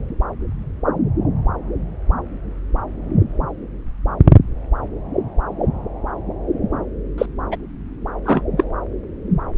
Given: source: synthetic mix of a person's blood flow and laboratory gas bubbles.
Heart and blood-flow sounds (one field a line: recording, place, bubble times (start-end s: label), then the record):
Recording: Doppler ultrasound of blood flow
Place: subclavian vein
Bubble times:
7.18-7.26 s: bubbles
7.51-7.57 s: bubbles
8.25-8.42 s: bubbles
8.57-8.64 s: bubbles
From the record:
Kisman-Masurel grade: 213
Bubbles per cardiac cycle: several, 3 to 8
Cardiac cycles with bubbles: 1 to 10%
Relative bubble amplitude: loud (0.450 to 0.775)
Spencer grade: 1 (occasional bubble signal discernible with the cardiac motion signal, with majority of cardiac periods free of bubbles)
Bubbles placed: anywhere in the cardiac cycle